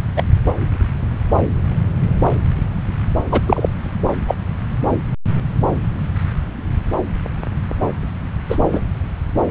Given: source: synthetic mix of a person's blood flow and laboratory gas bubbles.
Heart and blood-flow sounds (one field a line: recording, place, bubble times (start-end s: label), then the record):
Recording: Doppler ultrasound of blood flow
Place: subclavian vein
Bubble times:
0.16-0.23 s: bubbles
3.31-3.41 s: bubbles
3.46-3.68 s: bubbles
4.26-4.35 s: bubbles
8.49-8.57 s: bubbles
8.72-8.81 s: bubbles
From the record:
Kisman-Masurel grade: 123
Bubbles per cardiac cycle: 1 to 2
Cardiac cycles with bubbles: 10 to 50%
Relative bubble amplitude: loud (0.450 to 0.775)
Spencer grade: 2 (many but less than half of the cardiac periods contain bubble signals, singularly or in groups)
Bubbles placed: anywhere in the cardiac cycle